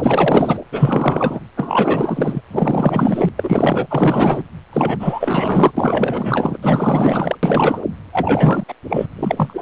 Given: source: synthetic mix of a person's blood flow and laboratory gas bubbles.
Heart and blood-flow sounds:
Doppler ultrasound of blood flow; precordium
0.00-0.58 s: bubbles
0.71-1.40 s: bubbles
1.56-2.41 s: bubbles
2.51-3.29 s: bubbles
3.36-3.86 s: bubbles
3.90-4.43 s: bubbles
4.72-5.71 s: bubbles
5.77-6.58 s: bubbles
6.62-7.36 s: bubbles
7.43-7.82 s: bubbles
8.12-8.64 s: bubbles
8.68-8.74 s: bubbles
8.89-9.07 s: bubbles
9.16-9.62 s: bubbles
From the record:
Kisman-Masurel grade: 444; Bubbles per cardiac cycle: continuous sound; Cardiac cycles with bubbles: 100%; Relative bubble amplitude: maximal (0.775 to 0.999); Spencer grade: 4 (maximum detectable bubble signal sounding continuously throughout systole and diastole of every cardiac period, and overriding the amplitude of the normal cardiac signals); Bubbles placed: anywhere in the cardiac cycle

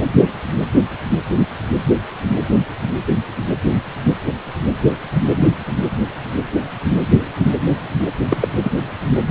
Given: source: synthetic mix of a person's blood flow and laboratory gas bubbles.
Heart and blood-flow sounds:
Doppler ultrasound of blood flow; precordium
8.30-8.37 s: bubbles
8.41-8.48 s: bubbles
8.59-8.70 s: bubbles
From the record:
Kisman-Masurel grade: 213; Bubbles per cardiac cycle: several, 3 to 8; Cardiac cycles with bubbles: 1 to 10%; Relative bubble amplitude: loud (0.450 to 0.775); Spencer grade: 1 (occasional bubble signal discernible with the cardiac motion signal, with majority of cardiac periods free of bubbles); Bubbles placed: anywhere in the cardiac cycle

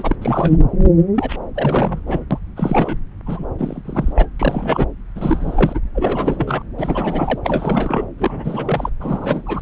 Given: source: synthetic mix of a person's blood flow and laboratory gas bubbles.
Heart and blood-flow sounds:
Doppler ultrasound of blood flow; subclavian vein
0.00-0.16 s: bubbles
0.22-0.56 s: bubbles
1.15-1.36 s: bubbles
1.55-2.00 s: bubbles
2.06-2.25 s: bubbles
2.31-2.38 s: bubbles
2.56-2.98 s: bubbles
3.25-3.46 s: bubbles
3.58-3.82 s: bubbles
3.84-4.12 s: bubbles
4.15-4.26 s: bubbles
4.39-4.87 s: bubbles
5.16-5.80 s: bubbles
5.95-6.62 s: bubbles
6.78-7.40 s: bubbles
7.44-8.05 s: bubbles
8.18-8.89 s: bubbles
9.00-9.61 s: bubbles
From the record:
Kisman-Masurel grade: 332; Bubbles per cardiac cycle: rolling drumbeat, 9 or more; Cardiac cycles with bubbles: 50 to 99%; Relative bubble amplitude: moderate (0.250 to 0.450); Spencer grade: 3 (all of the cardiac periods contain showers or single bubble signals, but not dominating or overriding the cardiac motion signals); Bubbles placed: anywhere in the cardiac cycle

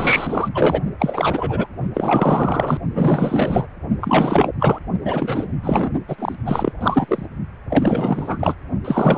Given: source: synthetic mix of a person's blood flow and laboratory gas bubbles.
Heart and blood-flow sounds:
Doppler ultrasound of blood flow; precordium
0.00-0.49 s: bubbles
0.53-0.82 s: bubbles
0.99-1.67 s: bubbles
1.94-2.77 s: bubbles
2.95-3.67 s: bubbles
4.00-4.50 s: bubbles
4.59-4.79 s: bubbles
5.04-5.47 s: bubbles
5.63-5.91 s: bubbles
6.08-6.35 s: bubbles
6.46-6.72 s: bubbles
6.80-7.26 s: bubbles
7.70-8.54 s: bubbles
8.85-9.18 s: bubbles
From the record:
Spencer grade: 4 (maximum detectable bubble signal sounding continuously throughout systole and diastole of every cardiac period, and overriding the amplitude of the normal cardiac signals); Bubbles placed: only in the low amplitude regions of the cardiac cycle

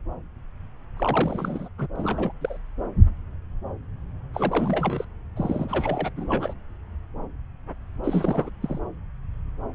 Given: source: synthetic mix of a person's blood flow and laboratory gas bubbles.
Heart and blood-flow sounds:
Doppler ultrasound of blood flow; subclavian vein
0.96-1.69 s: bubbles
1.77-1.87 s: bubbles
1.96-2.33 s: bubbles
2.41-2.58 s: bubbles
4.33-5.05 s: bubbles
5.36-6.10 s: bubbles
6.15-6.54 s: bubbles
8.04-8.50 s: bubbles
8.62-8.79 s: bubbles
From the record:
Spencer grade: 3 (all of the cardiac periods contain showers or single bubble signals, but not dominating or overriding the cardiac motion signals); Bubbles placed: anywhere in the cardiac cycle

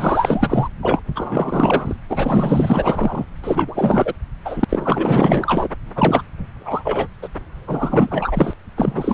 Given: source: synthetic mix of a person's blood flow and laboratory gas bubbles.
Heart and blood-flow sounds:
Doppler ultrasound of blood flow; subclavian vein
0.00-0.69 s: bubbles
0.82-1.02 s: bubbles
1.16-1.96 s: bubbles
2.09-3.25 s: bubbles
3.43-4.13 s: bubbles
4.44-4.64 s: bubbles
4.69-5.68 s: bubbles
5.96-6.22 s: bubbles
6.59-7.08 s: bubbles
7.22-7.29 s: bubbles
7.67-8.54 s: bubbles
8.77-9.14 s: bubbles
From the record:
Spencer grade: 4 (maximum detectable bubble signal sounding continuously throughout systole and diastole of every cardiac period, and overriding the amplitude of the normal cardiac signals); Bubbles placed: anywhere in the cardiac cycle

